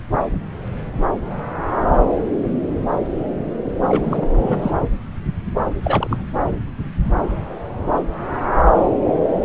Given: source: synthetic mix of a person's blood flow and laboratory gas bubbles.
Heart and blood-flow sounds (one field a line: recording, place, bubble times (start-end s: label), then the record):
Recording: Doppler ultrasound of blood flow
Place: subclavian vein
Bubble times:
3.82-4.29 s: bubbles
4.38-4.71 s: bubbles
5.83-6.27 s: bubbles
From the record:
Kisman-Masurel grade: 222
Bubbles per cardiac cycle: several, 3 to 8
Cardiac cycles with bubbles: 10 to 50%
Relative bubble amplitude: moderate (0.250 to 0.450)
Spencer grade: 2 (many but less than half of the cardiac periods contain bubble signals, singularly or in groups)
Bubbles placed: anywhere in the cardiac cycle